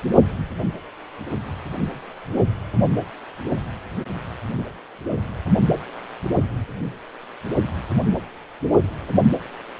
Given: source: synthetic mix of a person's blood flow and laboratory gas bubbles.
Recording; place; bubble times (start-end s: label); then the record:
Doppler ultrasound of blood flow; precordium
no bubbles
From the record:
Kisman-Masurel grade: 000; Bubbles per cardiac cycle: 0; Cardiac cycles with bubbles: 0%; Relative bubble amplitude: no bubbles discernible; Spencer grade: 0 (complete lack of bubble signals)